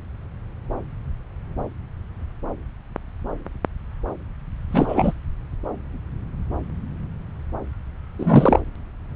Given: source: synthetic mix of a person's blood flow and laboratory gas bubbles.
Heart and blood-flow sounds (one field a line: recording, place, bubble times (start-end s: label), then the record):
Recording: Doppler ultrasound of blood flow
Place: subclavian vein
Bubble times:
4.72-5.13 s: bubbles
8.19-8.60 s: bubbles
From the record:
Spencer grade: 1 (occasional bubble signal discernible with the cardiac motion signal, with majority of cardiac periods free of bubbles)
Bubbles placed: anywhere in the cardiac cycle